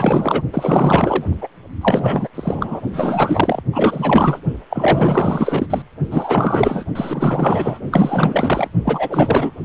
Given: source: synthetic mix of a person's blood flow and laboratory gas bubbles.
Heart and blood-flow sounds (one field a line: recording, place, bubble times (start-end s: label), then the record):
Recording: Doppler ultrasound of blood flow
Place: precordium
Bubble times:
0.00-0.42 s: bubbles
0.53-1.24 s: bubbles
1.41-1.48 s: bubbles
1.81-2.29 s: bubbles
2.35-2.81 s: bubbles
2.93-3.62 s: bubbles
3.72-4.40 s: bubbles
4.69-5.67 s: bubbles
5.69-5.82 s: bubbles
6.10-6.84 s: bubbles
6.95-7.80 s: bubbles
7.91-8.68 s: bubbles
8.85-9.52 s: bubbles
From the record:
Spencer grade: 4 (maximum detectable bubble signal sounding continuously throughout systole and diastole of every cardiac period, and overriding the amplitude of the normal cardiac signals)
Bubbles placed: only in the low amplitude regions of the cardiac cycle